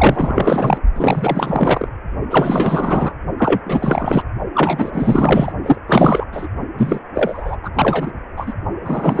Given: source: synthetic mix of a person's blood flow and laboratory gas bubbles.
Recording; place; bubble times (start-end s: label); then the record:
Doppler ultrasound of blood flow; precordium
0.00-0.78 s: bubbles
0.95-1.88 s: bubbles
2.30-3.13 s: bubbles
3.38-3.60 s: bubbles
3.66-4.23 s: bubbles
4.53-5.53 s: bubbles
5.63-5.79 s: bubbles
5.87-6.25 s: bubbles
6.32-6.48 s: bubbles
6.77-7.00 s: bubbles
7.15-7.56 s: bubbles
7.63-7.71 s: bubbles
7.75-8.12 s: bubbles
8.37-8.52 s: bubbles
8.83-9.20 s: bubbles
From the record:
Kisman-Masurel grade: 444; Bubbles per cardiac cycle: continuous sound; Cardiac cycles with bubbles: 100%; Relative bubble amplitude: maximal (0.775 to 0.999); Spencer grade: 4 (maximum detectable bubble signal sounding continuously throughout systole and diastole of every cardiac period, and overriding the amplitude of the normal cardiac signals); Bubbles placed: only in the low amplitude regions of the cardiac cycle